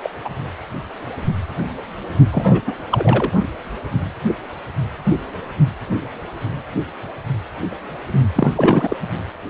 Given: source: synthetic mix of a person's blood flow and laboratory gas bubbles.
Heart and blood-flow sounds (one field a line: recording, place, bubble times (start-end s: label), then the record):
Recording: Doppler ultrasound of blood flow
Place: precordium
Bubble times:
0.03-0.11 s: bubbles
0.25-0.29 s: bubbles
2.31-2.62 s: bubbles
2.67-2.73 s: bubbles
2.90-3.32 s: bubbles
8.35-8.52 s: bubbles
8.55-8.97 s: bubbles
From the record:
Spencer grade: 2 (many but less than half of the cardiac periods contain bubble signals, singularly or in groups)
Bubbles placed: only in the low amplitude regions of the cardiac cycle